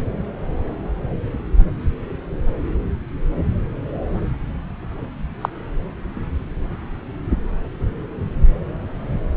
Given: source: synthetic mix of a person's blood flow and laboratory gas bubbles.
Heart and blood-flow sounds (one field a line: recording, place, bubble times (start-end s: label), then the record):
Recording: Doppler ultrasound of blood flow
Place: subclavian vein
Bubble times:
5.41-5.49 s: bubbles
From the record:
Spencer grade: 1 (occasional bubble signal discernible with the cardiac motion signal, with majority of cardiac periods free of bubbles)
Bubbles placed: anywhere in the cardiac cycle